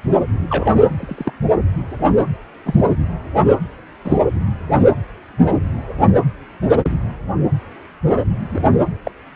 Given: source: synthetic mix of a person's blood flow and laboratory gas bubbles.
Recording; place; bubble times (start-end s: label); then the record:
Doppler ultrasound of blood flow; precordium
0.49-0.82 s: bubbles
0.89-1.31 s: bubbles
2.64-2.91 s: bubbles
4.04-4.20 s: bubbles
6.70-6.79 s: bubbles
8.50-8.63 s: bubbles
9.05-9.11 s: bubbles
From the record:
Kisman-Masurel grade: 122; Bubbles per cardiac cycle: 1 to 2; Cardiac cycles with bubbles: 10 to 50%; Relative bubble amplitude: moderate (0.250 to 0.450); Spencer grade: 2 (many but less than half of the cardiac periods contain bubble signals, singularly or in groups); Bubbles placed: anywhere in the cardiac cycle